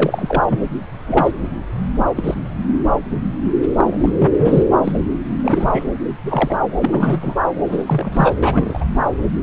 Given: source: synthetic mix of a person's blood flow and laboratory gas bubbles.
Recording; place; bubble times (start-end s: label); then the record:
Doppler ultrasound of blood flow; subclavian vein
0.00-0.43 s: bubbles
0.46-0.59 s: bubbles
1.07-1.31 s: bubbles
2.17-2.34 s: bubbles
3.77-4.30 s: bubbles
4.38-4.73 s: bubbles
4.84-5.00 s: bubbles
5.43-5.84 s: bubbles
6.25-6.59 s: bubbles
6.81-7.38 s: bubbles
7.66-8.34 s: bubbles
8.42-8.85 s: bubbles
From the record:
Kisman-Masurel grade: 232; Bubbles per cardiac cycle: several, 3 to 8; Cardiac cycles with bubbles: 50 to 99%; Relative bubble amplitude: moderate (0.250 to 0.450); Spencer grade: 3 (all of the cardiac periods contain showers or single bubble signals, but not dominating or overriding the cardiac motion signals); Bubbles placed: anywhere in the cardiac cycle